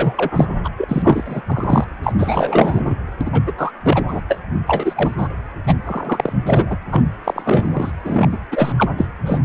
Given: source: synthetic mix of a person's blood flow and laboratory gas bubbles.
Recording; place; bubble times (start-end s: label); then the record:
Doppler ultrasound of blood flow; precordium
0.00-0.54 s: bubbles
0.64-0.69 s: bubbles
0.77-0.84 s: bubbles
0.88-1.42 s: bubbles
1.46-1.86 s: bubbles
2.03-2.13 s: bubbles
2.18-2.95 s: bubbles
3.21-3.42 s: bubbles
3.46-3.52 s: bubbles
3.57-3.72 s: bubbles
3.83-4.04 s: bubbles
4.08-4.21 s: bubbles
4.29-4.39 s: bubbles
4.67-5.28 s: bubbles
5.67-5.74 s: bubbles
5.85-6.33 s: bubbles
6.46-6.77 s: bubbles
6.91-7.03 s: bubbles
7.24-7.91 s: bubbles
8.04-8.38 s: bubbles
8.51-8.72 s: bubbles
8.77-8.90 s: bubbles
8.97-9.06 s: bubbles
9.26-9.39 s: bubbles
From the record:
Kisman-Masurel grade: 333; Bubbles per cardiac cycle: rolling drumbeat, 9 or more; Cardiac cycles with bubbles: 50 to 99%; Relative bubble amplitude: loud (0.450 to 0.775); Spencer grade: 3 (all of the cardiac periods contain showers or single bubble signals, but not dominating or overriding the cardiac motion signals); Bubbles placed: anywhere in the cardiac cycle